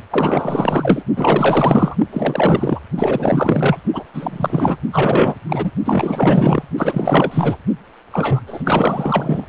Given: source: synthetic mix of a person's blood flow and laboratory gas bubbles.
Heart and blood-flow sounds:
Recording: Doppler ultrasound of blood flow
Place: precordium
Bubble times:
0.10-1.02 s: bubbles
1.16-1.95 s: bubbles
2.12-2.80 s: bubbles
2.96-3.77 s: bubbles
3.93-4.04 s: bubbles
4.13-4.77 s: bubbles
4.92-5.35 s: bubbles
5.49-5.71 s: bubbles
5.85-6.63 s: bubbles
6.78-7.58 s: bubbles
8.12-8.41 s: bubbles
8.46-9.46 s: bubbles
From the record:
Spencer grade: 4 (maximum detectable bubble signal sounding continuously throughout systole and diastole of every cardiac period, and overriding the amplitude of the normal cardiac signals)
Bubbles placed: only in the low amplitude regions of the cardiac cycle

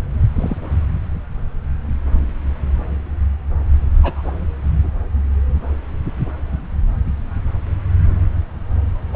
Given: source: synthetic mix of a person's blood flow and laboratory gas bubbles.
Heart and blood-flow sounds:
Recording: Doppler ultrasound of blood flow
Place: subclavian vein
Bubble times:
0.36-0.56 s: bubbles
4.03-4.30 s: bubbles
9.13-9.15 s: bubbles
From the record:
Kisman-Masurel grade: 122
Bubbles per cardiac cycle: 1 to 2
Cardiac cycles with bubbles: 10 to 50%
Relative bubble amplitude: moderate (0.250 to 0.450)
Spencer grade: 2 (many but less than half of the cardiac periods contain bubble signals, singularly or in groups)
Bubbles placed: anywhere in the cardiac cycle

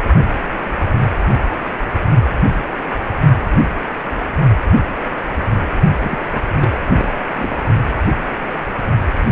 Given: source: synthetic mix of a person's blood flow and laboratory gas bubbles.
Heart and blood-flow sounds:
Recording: Doppler ultrasound of blood flow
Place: precordium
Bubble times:
6.04-6.17 s: bubbles
6.32-6.42 s: bubbles
6.59-6.86 s: bubbles
6.90-7.13 s: bubbles
7.32-7.57 s: bubbles
From the record:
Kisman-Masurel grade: 211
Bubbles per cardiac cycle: several, 3 to 8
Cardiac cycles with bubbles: 1 to 10%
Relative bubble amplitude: barely perceptible (0.100 to 0.250)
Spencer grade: 1 (occasional bubble signal discernible with the cardiac motion signal, with majority of cardiac periods free of bubbles)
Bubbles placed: only in the low amplitude regions of the cardiac cycle

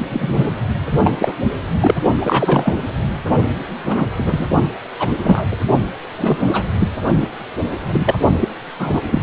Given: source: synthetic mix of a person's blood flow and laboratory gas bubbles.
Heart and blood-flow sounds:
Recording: Doppler ultrasound of blood flow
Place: precordium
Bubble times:
0.10-0.51 s: bubbles
0.92-0.99 s: bubbles
1.03-1.12 s: bubbles
1.19-1.33 s: bubbles
1.80-1.95 s: bubbles
2.21-2.86 s: bubbles
3.84-4.07 s: bubbles
4.15-4.46 s: bubbles
4.99-5.08 s: bubbles
5.24-5.46 s: bubbles
5.51-5.57 s: bubbles
6.18-6.63 s: bubbles
6.79-6.91 s: bubbles
7.21-7.29 s: bubbles
7.87-8.15 s: bubbles
8.40-8.48 s: bubbles
8.79-9.01 s: bubbles
9.11-9.23 s: bubbles
From the record:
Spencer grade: 3 (all of the cardiac periods contain showers or single bubble signals, but not dominating or overriding the cardiac motion signals)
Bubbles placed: only in the low amplitude regions of the cardiac cycle

